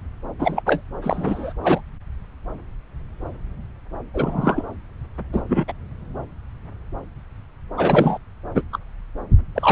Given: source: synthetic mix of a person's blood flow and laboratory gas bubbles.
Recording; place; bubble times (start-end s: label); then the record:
Doppler ultrasound of blood flow; subclavian vein
0.39-0.62 s: bubbles
0.66-0.82 s: bubbles
1.02-1.53 s: bubbles
1.63-1.81 s: bubbles
4.14-4.64 s: bubbles
5.32-5.42 s: bubbles
5.49-5.65 s: bubbles
5.68-5.73 s: bubbles
7.77-8.18 s: bubbles
8.54-8.63 s: bubbles
8.72-8.78 s: bubbles
9.54-9.72 s: bubbles
From the record:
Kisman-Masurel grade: 223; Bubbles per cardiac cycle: several, 3 to 8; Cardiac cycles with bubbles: 10 to 50%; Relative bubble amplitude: loud (0.450 to 0.775); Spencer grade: 2 (many but less than half of the cardiac periods contain bubble signals, singularly or in groups); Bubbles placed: anywhere in the cardiac cycle